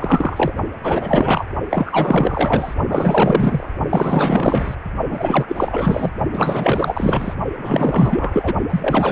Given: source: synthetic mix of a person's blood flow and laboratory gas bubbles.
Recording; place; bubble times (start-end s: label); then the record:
Doppler ultrasound of blood flow; precordium
0.00-0.53 s: bubbles
0.82-1.46 s: bubbles
1.70-2.75 s: bubbles
2.89-3.69 s: bubbles
3.90-4.74 s: bubbles
5.09-6.10 s: bubbles
6.33-7.34 s: bubbles
7.58-8.53 s: bubbles
8.70-9.12 s: bubbles
From the record:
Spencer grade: 4 (maximum detectable bubble signal sounding continuously throughout systole and diastole of every cardiac period, and overriding the amplitude of the normal cardiac signals); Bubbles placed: only in the low amplitude regions of the cardiac cycle